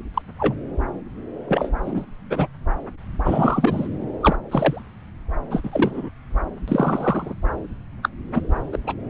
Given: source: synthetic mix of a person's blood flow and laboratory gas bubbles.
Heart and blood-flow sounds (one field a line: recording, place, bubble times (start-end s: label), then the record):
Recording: Doppler ultrasound of blood flow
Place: subclavian vein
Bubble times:
0.14-0.22 s: bubbles
0.39-0.54 s: bubbles
1.48-1.70 s: bubbles
1.84-2.06 s: bubbles
2.30-2.48 s: bubbles
3.24-3.88 s: bubbles
4.21-4.36 s: bubbles
4.51-4.82 s: bubbles
5.50-5.60 s: bubbles
5.63-6.09 s: bubbles
6.67-7.33 s: bubbles
8.03-8.09 s: bubbles
8.34-8.41 s: bubbles
8.72-8.78 s: bubbles
8.87-8.94 s: bubbles
From the record:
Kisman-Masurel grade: 242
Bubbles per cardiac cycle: several, 3 to 8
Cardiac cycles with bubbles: 100%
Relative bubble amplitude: moderate (0.250 to 0.450)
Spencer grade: 3 (all of the cardiac periods contain showers or single bubble signals, but not dominating or overriding the cardiac motion signals)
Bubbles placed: anywhere in the cardiac cycle